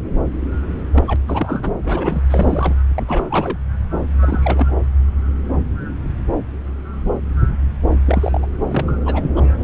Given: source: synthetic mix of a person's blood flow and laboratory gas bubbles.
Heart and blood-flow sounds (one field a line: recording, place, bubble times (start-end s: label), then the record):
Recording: Doppler ultrasound of blood flow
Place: subclavian vein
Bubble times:
0.95-1.04 s: bubbles
1.07-1.16 s: bubbles
1.27-1.75 s: bubbles
1.83-2.22 s: bubbles
2.28-2.75 s: bubbles
2.96-3.02 s: bubbles
3.08-3.25 s: bubbles
3.30-3.57 s: bubbles
4.22-4.74 s: bubbles
8.06-8.46 s: bubbles
8.71-8.92 s: bubbles
9.05-9.31 s: bubbles
9.36-9.41 s: bubbles
9.59-9.64 s: bubbles
From the record:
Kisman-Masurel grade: 232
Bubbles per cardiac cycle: several, 3 to 8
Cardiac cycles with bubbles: 50 to 99%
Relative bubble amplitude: moderate (0.250 to 0.450)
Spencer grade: 3 (all of the cardiac periods contain showers or single bubble signals, but not dominating or overriding the cardiac motion signals)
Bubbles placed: anywhere in the cardiac cycle